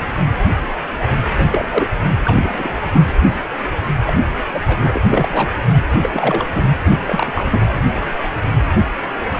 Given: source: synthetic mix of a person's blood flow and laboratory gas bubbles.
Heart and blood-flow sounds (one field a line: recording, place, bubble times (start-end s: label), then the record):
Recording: Doppler ultrasound of blood flow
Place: precordium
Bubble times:
1.36-1.67 s: bubbles
1.71-1.87 s: bubbles
2.24-2.75 s: bubbles
2.92-3.01 s: bubbles
4.07-4.13 s: bubbles
4.54-4.59 s: bubbles
4.66-5.01 s: bubbles
5.08-5.51 s: bubbles
5.90-6.46 s: bubbles
6.51-6.63 s: bubbles
6.85-6.92 s: bubbles
7.05-7.65 s: bubbles
From the record:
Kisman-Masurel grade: 232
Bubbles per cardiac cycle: several, 3 to 8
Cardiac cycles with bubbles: 50 to 99%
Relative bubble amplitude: moderate (0.250 to 0.450)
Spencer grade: 3 (all of the cardiac periods contain showers or single bubble signals, but not dominating or overriding the cardiac motion signals)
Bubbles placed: anywhere in the cardiac cycle